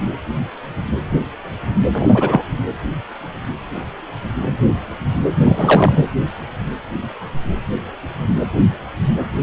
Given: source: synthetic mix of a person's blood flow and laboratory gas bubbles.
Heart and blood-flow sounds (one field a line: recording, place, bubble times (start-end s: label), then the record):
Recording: Doppler ultrasound of blood flow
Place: precordium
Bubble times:
1.92-2.45 s: bubbles
5.46-6.06 s: bubbles
From the record:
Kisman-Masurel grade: 223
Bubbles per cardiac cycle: several, 3 to 8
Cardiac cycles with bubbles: 10 to 50%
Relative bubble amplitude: loud (0.450 to 0.775)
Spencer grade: 2 (many but less than half of the cardiac periods contain bubble signals, singularly or in groups)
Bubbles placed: anywhere in the cardiac cycle